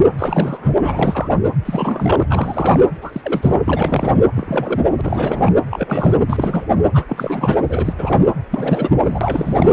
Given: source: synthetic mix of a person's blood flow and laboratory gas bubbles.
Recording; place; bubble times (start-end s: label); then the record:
Doppler ultrasound of blood flow; precordium
0.00-0.05 s: bubbles
0.17-0.71 s: bubbles
0.81-1.35 s: bubbles
1.65-2.79 s: bubbles
3.02-3.62 s: bubbles
3.65-4.14 s: bubbles
4.34-4.81 s: bubbles
4.83-4.88 s: bubbles
4.96-5.50 s: bubbles
5.71-6.15 s: bubbles
6.26-6.65 s: bubbles
6.93-7.04 s: bubbles
7.08-7.56 s: bubbles
7.68-7.94 s: bubbles
7.98-8.20 s: bubbles
8.25-8.33 s: bubbles
8.50-8.90 s: bubbles
9.00-9.73 s: bubbles
From the record:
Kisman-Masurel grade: 342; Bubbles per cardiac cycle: rolling drumbeat, 9 or more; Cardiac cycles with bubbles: 100%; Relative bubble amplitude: moderate (0.250 to 0.450); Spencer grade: 3 (all of the cardiac periods contain showers or single bubble signals, but not dominating or overriding the cardiac motion signals); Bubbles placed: anywhere in the cardiac cycle